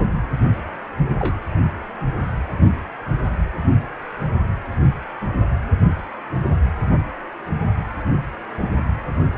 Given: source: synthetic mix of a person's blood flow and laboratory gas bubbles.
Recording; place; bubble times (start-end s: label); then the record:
Doppler ultrasound of blood flow; precordium
1.19-1.39 s: bubbles
From the record:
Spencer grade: 2 (many but less than half of the cardiac periods contain bubble signals, singularly or in groups); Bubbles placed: only in the low amplitude regions of the cardiac cycle